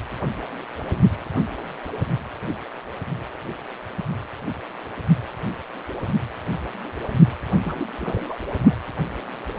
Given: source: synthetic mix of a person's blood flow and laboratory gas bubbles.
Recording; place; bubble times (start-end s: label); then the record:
Doppler ultrasound of blood flow; precordium
7.64-7.87 s: bubbles
8.01-8.36 s: bubbles
8.66-8.75 s: bubbles
From the record:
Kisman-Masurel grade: 211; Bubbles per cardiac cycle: several, 3 to 8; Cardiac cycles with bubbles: 1 to 10%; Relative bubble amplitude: barely perceptible (0.100 to 0.250); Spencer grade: 1 (occasional bubble signal discernible with the cardiac motion signal, with majority of cardiac periods free of bubbles); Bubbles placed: anywhere in the cardiac cycle